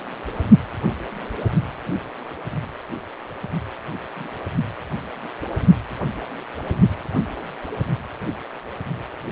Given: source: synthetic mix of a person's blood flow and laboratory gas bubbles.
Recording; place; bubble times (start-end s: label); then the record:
Doppler ultrasound of blood flow; precordium
4.15-4.28 s: bubbles
From the record:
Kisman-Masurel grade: 111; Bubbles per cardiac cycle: 1 to 2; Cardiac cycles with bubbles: 1 to 10%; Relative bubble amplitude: barely perceptible (0.100 to 0.250); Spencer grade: 1 (occasional bubble signal discernible with the cardiac motion signal, with majority of cardiac periods free of bubbles); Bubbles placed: only in the low amplitude regions of the cardiac cycle